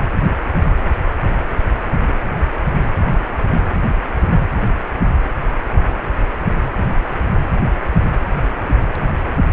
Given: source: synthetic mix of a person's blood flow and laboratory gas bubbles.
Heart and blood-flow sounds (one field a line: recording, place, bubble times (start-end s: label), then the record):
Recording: Doppler ultrasound of blood flow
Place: precordium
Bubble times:
no bubbles
From the record:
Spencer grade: 0 (complete lack of bubble signals)